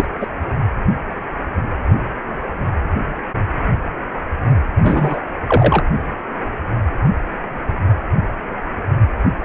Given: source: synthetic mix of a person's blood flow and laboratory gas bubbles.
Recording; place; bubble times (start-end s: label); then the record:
Doppler ultrasound of blood flow; precordium
0.00-0.05 s: bubbles
0.20-0.27 s: bubbles
4.83-5.20 s: bubbles
5.48-5.83 s: bubbles
From the record:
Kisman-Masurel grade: 123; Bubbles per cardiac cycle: 1 to 2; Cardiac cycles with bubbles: 10 to 50%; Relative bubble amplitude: loud (0.450 to 0.775); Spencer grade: 2 (many but less than half of the cardiac periods contain bubble signals, singularly or in groups); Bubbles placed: only in the low amplitude regions of the cardiac cycle